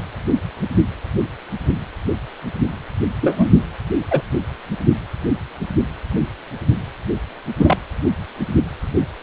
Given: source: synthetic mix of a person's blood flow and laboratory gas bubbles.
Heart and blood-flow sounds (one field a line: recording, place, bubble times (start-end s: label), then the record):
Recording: Doppler ultrasound of blood flow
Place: precordium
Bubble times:
3.21-3.49 s: bubbles
4.11-4.21 s: bubbles
7.56-7.78 s: bubbles
From the record:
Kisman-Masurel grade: 123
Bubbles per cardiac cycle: 1 to 2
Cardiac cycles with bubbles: 10 to 50%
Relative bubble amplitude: loud (0.450 to 0.775)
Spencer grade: 2 (many but less than half of the cardiac periods contain bubble signals, singularly or in groups)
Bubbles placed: anywhere in the cardiac cycle